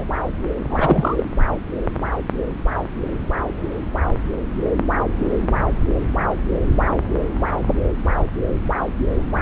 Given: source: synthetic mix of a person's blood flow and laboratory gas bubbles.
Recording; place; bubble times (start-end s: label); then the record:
Doppler ultrasound of blood flow; subclavian vein
0.00-0.04 s: bubbles
0.68-1.24 s: bubbles
From the record:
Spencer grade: 1 (occasional bubble signal discernible with the cardiac motion signal, with majority of cardiac periods free of bubbles); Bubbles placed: anywhere in the cardiac cycle